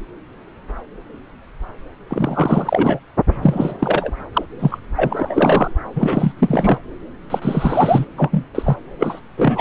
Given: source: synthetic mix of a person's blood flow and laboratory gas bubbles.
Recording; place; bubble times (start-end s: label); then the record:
Doppler ultrasound of blood flow; subclavian vein
2.09-2.99 s: bubbles
3.42-3.75 s: bubbles
3.79-4.12 s: bubbles
4.33-4.45 s: bubbles
4.59-4.78 s: bubbles
4.96-5.71 s: bubbles
5.96-6.32 s: bubbles
6.38-6.78 s: bubbles
7.30-8.05 s: bubbles
8.17-8.46 s: bubbles
8.54-8.77 s: bubbles
8.98-9.21 s: bubbles
9.37-9.61 s: bubbles
From the record:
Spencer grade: 3 (all of the cardiac periods contain showers or single bubble signals, but not dominating or overriding the cardiac motion signals); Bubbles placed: anywhere in the cardiac cycle